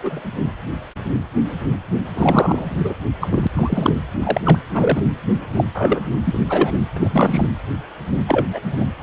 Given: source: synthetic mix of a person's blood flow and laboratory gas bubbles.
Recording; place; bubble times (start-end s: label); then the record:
Doppler ultrasound of blood flow; precordium
0.04-0.22 s: bubbles
2.17-2.67 s: bubbles
2.84-2.95 s: bubbles
3.20-3.47 s: bubbles
3.53-3.94 s: bubbles
4.23-4.41 s: bubbles
4.45-4.58 s: bubbles
4.74-5.02 s: bubbles
5.54-5.64 s: bubbles
5.75-6.00 s: bubbles
6.25-6.40 s: bubbles
6.49-6.82 s: bubbles
6.96-7.45 s: bubbles
8.27-8.44 s: bubbles
8.53-8.60 s: bubbles
8.72-8.88 s: bubbles
From the record:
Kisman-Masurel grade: 233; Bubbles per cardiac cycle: several, 3 to 8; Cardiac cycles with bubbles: 50 to 99%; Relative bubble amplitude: loud (0.450 to 0.775); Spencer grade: 3 (all of the cardiac periods contain showers or single bubble signals, but not dominating or overriding the cardiac motion signals); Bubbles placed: anywhere in the cardiac cycle